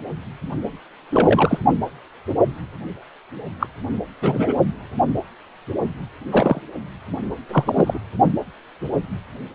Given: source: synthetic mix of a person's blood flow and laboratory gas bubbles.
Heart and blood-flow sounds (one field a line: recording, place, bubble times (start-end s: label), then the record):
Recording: Doppler ultrasound of blood flow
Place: precordium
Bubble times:
1.12-1.58 s: bubbles
3.59-3.67 s: bubbles
4.21-4.54 s: bubbles
6.31-6.61 s: bubbles
7.49-7.98 s: bubbles
From the record:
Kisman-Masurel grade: 232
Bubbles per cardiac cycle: several, 3 to 8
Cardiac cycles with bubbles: 50 to 99%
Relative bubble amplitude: moderate (0.250 to 0.450)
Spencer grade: 3 (all of the cardiac periods contain showers or single bubble signals, but not dominating or overriding the cardiac motion signals)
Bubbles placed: only in the low amplitude regions of the cardiac cycle